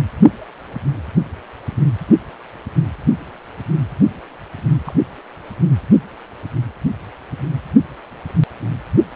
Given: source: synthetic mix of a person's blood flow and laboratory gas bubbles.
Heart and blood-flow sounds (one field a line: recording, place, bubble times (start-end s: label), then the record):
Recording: Doppler ultrasound of blood flow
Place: precordium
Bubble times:
4.85-4.94 s: bubbles
From the record:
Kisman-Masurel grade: 111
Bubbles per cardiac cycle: 1 to 2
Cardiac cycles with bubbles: 1 to 10%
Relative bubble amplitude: barely perceptible (0.100 to 0.250)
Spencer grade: 1 (occasional bubble signal discernible with the cardiac motion signal, with majority of cardiac periods free of bubbles)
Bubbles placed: anywhere in the cardiac cycle